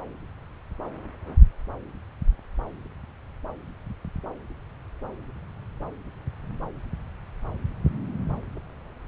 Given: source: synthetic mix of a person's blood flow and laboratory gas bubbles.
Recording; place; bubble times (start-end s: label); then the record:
Doppler ultrasound of blood flow; subclavian vein
no bubbles
From the record:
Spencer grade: 0 (complete lack of bubble signals)